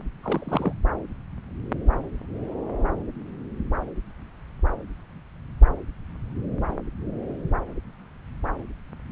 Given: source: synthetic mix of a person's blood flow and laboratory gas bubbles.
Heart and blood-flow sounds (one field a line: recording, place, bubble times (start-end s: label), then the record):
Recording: Doppler ultrasound of blood flow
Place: subclavian vein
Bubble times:
0.23-0.74 s: bubbles
From the record:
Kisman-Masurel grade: 211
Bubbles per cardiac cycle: several, 3 to 8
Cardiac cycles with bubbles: 1 to 10%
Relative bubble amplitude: barely perceptible (0.100 to 0.250)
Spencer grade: 1 (occasional bubble signal discernible with the cardiac motion signal, with majority of cardiac periods free of bubbles)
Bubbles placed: anywhere in the cardiac cycle